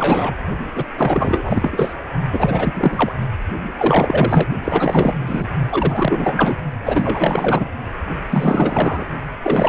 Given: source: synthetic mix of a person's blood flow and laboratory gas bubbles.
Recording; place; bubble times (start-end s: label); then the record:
Doppler ultrasound of blood flow; precordium
0.00-0.33 s: bubbles
0.75-0.85 s: bubbles
0.96-1.94 s: bubbles
2.32-3.12 s: bubbles
3.77-4.47 s: bubbles
4.62-5.46 s: bubbles
5.69-6.56 s: bubbles
6.83-7.69 s: bubbles
8.29-9.05 s: bubbles
9.42-9.69 s: bubbles
From the record:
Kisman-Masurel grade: 444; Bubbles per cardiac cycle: continuous sound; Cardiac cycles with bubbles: 100%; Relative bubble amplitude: maximal (0.775 to 0.999); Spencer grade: 4 (maximum detectable bubble signal sounding continuously throughout systole and diastole of every cardiac period, and overriding the amplitude of the normal cardiac signals); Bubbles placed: only in the low amplitude regions of the cardiac cycle